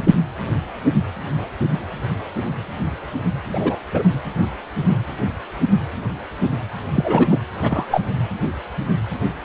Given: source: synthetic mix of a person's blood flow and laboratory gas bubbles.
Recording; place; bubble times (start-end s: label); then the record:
Doppler ultrasound of blood flow; precordium
0.00-0.03 s: bubbles
0.05-0.15 s: bubbles
3.52-3.76 s: bubbles
3.94-4.03 s: bubbles
6.96-7.39 s: bubbles
7.62-8.02 s: bubbles
From the record:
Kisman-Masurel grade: 223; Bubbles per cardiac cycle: several, 3 to 8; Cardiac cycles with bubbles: 10 to 50%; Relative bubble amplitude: loud (0.450 to 0.775); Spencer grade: 2 (many but less than half of the cardiac periods contain bubble signals, singularly or in groups); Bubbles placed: anywhere in the cardiac cycle